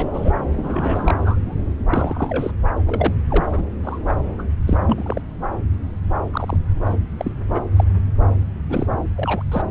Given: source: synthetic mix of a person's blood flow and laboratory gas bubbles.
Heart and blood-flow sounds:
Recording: Doppler ultrasound of blood flow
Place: subclavian vein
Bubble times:
0.00-0.09 s: bubbles
0.14-0.32 s: bubbles
0.56-1.55 s: bubbles
1.90-2.51 s: bubbles
2.87-3.14 s: bubbles
3.29-3.45 s: bubbles
3.52-3.63 s: bubbles
3.84-3.98 s: bubbles
4.08-4.14 s: bubbles
4.38-4.42 s: bubbles
4.67-4.78 s: bubbles
4.87-5.21 s: bubbles
6.31-6.57 s: bubbles
6.85-6.96 s: bubbles
7.17-7.31 s: bubbles
7.54-7.61 s: bubbles
7.76-7.84 s: bubbles
8.70-8.87 s: bubbles
9.15-9.43 s: bubbles
9.52-9.62 s: bubbles
From the record:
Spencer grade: 3 (all of the cardiac periods contain showers or single bubble signals, but not dominating or overriding the cardiac motion signals)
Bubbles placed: anywhere in the cardiac cycle

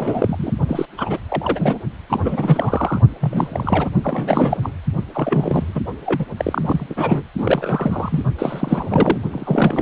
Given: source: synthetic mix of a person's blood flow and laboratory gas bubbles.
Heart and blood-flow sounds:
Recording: Doppler ultrasound of blood flow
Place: precordium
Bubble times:
0.00-0.53 s: bubbles
0.68-0.85 s: bubbles
0.97-1.18 s: bubbles
1.28-1.80 s: bubbles
2.10-3.01 s: bubbles
3.21-3.89 s: bubbles
4.03-4.71 s: bubbles
5.14-5.81 s: bubbles
6.06-6.25 s: bubbles
6.37-6.87 s: bubbles
6.89-7.23 s: bubbles
7.38-8.22 s: bubbles
8.38-9.18 s: bubbles
9.31-9.81 s: bubbles
From the record:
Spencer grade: 3 (all of the cardiac periods contain showers or single bubble signals, but not dominating or overriding the cardiac motion signals)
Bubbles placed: only in the low amplitude regions of the cardiac cycle

